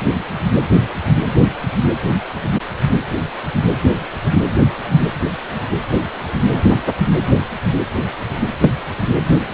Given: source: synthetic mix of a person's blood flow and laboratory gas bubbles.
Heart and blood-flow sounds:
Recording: Doppler ultrasound of blood flow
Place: precordium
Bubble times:
8.60-8.71 s: bubbles
From the record:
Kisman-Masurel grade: 113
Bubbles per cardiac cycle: 1 to 2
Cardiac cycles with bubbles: 1 to 10%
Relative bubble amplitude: loud (0.450 to 0.775)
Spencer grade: 1 (occasional bubble signal discernible with the cardiac motion signal, with majority of cardiac periods free of bubbles)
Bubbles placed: anywhere in the cardiac cycle

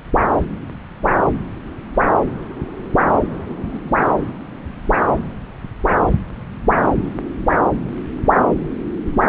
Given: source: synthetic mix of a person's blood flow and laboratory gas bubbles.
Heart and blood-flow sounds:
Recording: Doppler ultrasound of blood flow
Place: subclavian vein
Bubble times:
3.46-4.04 s: bubbles
From the record:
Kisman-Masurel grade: 121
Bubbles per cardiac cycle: 1 to 2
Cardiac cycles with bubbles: 10 to 50%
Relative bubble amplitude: barely perceptible (0.100 to 0.250)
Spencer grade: 2 (many but less than half of the cardiac periods contain bubble signals, singularly or in groups)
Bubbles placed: anywhere in the cardiac cycle

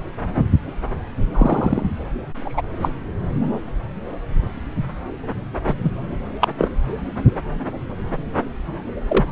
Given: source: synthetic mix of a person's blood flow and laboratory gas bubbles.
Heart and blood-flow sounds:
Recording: Doppler ultrasound of blood flow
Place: subclavian vein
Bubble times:
1.33-1.83 s: bubbles
2.45-2.62 s: bubbles
2.82-2.89 s: bubbles
5.67-5.74 s: bubbles
5.83-5.91 s: bubbles
6.41-6.48 s: bubbles
6.58-6.69 s: bubbles
9.08-9.25 s: bubbles
From the record:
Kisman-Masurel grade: 123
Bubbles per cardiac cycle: 1 to 2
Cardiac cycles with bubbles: 10 to 50%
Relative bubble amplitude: loud (0.450 to 0.775)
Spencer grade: 2 (many but less than half of the cardiac periods contain bubble signals, singularly or in groups)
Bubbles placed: anywhere in the cardiac cycle

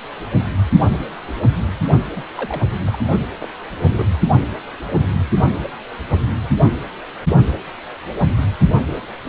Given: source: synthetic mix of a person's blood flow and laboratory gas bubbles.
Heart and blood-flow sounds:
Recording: Doppler ultrasound of blood flow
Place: precordium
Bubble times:
2.15-2.23 s: bubbles
2.35-2.62 s: bubbles
2.86-2.99 s: bubbles
3.40-3.49 s: bubbles
3.84-3.88 s: bubbles
3.96-4.13 s: bubbles
From the record:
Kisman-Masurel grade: 221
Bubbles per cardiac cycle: several, 3 to 8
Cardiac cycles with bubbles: 10 to 50%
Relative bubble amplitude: barely perceptible (0.100 to 0.250)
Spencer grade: 2 (many but less than half of the cardiac periods contain bubble signals, singularly or in groups)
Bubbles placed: only in the low amplitude regions of the cardiac cycle

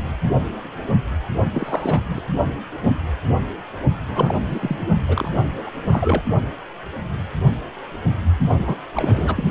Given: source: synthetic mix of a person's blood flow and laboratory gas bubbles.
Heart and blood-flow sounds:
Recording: Doppler ultrasound of blood flow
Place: precordium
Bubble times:
1.51-2.00 s: bubbles
2.08-2.22 s: bubbles
4.08-4.38 s: bubbles
4.49-4.88 s: bubbles
5.08-5.31 s: bubbles
5.58-5.63 s: bubbles
5.66-5.71 s: bubbles
5.90-6.22 s: bubbles
8.66-8.75 s: bubbles
8.95-9.51 s: bubbles
From the record:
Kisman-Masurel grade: 332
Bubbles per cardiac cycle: rolling drumbeat, 9 or more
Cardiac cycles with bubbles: 50 to 99%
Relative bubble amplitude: moderate (0.250 to 0.450)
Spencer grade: 3 (all of the cardiac periods contain showers or single bubble signals, but not dominating or overriding the cardiac motion signals)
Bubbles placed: only in the low amplitude regions of the cardiac cycle

